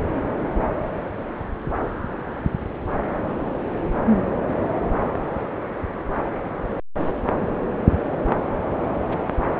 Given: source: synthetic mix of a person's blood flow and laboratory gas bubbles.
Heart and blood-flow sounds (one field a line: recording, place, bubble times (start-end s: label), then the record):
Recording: Doppler ultrasound of blood flow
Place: subclavian vein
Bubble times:
8.67-8.77 s: bubbles
9.04-9.18 s: bubbles
9.34-9.60 s: bubbles
From the record:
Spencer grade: 1 (occasional bubble signal discernible with the cardiac motion signal, with majority of cardiac periods free of bubbles)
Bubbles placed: anywhere in the cardiac cycle